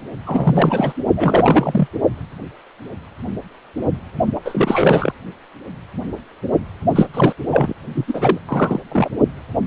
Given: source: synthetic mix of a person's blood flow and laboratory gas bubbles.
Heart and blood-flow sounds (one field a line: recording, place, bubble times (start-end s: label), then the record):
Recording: Doppler ultrasound of blood flow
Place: precordium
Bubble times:
0.26-0.92 s: bubbles
1.16-1.88 s: bubbles
4.35-4.39 s: bubbles
4.45-5.12 s: bubbles
6.95-7.06 s: bubbles
7.13-7.33 s: bubbles
7.51-7.73 s: bubbles
7.94-8.05 s: bubbles
8.07-8.38 s: bubbles
8.48-8.79 s: bubbles
8.91-9.10 s: bubbles
From the record:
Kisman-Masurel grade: 333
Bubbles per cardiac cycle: rolling drumbeat, 9 or more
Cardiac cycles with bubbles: 50 to 99%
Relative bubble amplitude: loud (0.450 to 0.775)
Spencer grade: 3 (all of the cardiac periods contain showers or single bubble signals, but not dominating or overriding the cardiac motion signals)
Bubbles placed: only in the low amplitude regions of the cardiac cycle